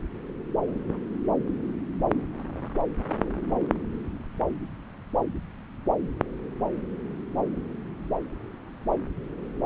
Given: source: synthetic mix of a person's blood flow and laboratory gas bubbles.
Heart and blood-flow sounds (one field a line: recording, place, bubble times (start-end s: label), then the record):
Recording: Doppler ultrasound of blood flow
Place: subclavian vein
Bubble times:
no bubbles
From the record:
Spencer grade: 0 (complete lack of bubble signals)